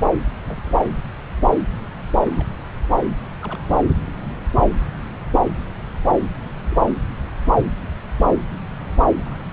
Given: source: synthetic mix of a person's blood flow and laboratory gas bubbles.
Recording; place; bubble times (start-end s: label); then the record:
Doppler ultrasound of blood flow; subclavian vein
0.48-0.76 s: bubbles
2.36-2.47 s: bubbles
3.42-3.60 s: bubbles
6.40-6.55 s: bubbles
6.70-6.77 s: bubbles
9.16-9.46 s: bubbles
From the record:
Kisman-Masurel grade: 121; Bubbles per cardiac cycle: 1 to 2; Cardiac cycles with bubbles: 10 to 50%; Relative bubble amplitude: barely perceptible (0.100 to 0.250); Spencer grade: 2 (many but less than half of the cardiac periods contain bubble signals, singularly or in groups); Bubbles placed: anywhere in the cardiac cycle